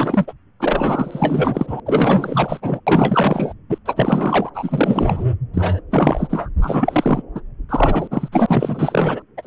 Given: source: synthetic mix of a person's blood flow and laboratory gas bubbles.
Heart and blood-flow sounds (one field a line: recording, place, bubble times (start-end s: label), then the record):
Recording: Doppler ultrasound of blood flow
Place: subclavian vein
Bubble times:
0.00-0.33 s: bubbles
0.59-1.80 s: bubbles
1.86-2.80 s: bubbles
2.86-3.53 s: bubbles
3.69-3.78 s: bubbles
3.85-4.50 s: bubbles
4.54-5.25 s: bubbles
5.54-5.81 s: bubbles
5.91-6.49 s: bubbles
6.61-7.23 s: bubbles
7.35-7.41 s: bubbles
7.69-8.08 s: bubbles
8.11-8.29 s: bubbles
8.32-9.22 s: bubbles
9.37-9.47 s: bubbles
From the record:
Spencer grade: 4 (maximum detectable bubble signal sounding continuously throughout systole and diastole of every cardiac period, and overriding the amplitude of the normal cardiac signals)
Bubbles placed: anywhere in the cardiac cycle